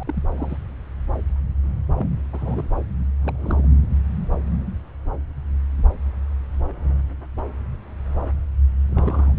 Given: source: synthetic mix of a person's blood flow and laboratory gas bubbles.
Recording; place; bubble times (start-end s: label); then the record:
Doppler ultrasound of blood flow; subclavian vein
0.00-0.03 s: bubbles
0.07-0.23 s: bubbles
0.37-0.57 s: bubbles
1.96-2.06 s: bubbles
2.32-2.65 s: bubbles
3.23-3.70 s: bubbles
8.91-9.35 s: bubbles
From the record:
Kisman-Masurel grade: 221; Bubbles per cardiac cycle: several, 3 to 8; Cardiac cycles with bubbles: 10 to 50%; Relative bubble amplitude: barely perceptible (0.100 to 0.250); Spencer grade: 2 (many but less than half of the cardiac periods contain bubble signals, singularly or in groups); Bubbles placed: anywhere in the cardiac cycle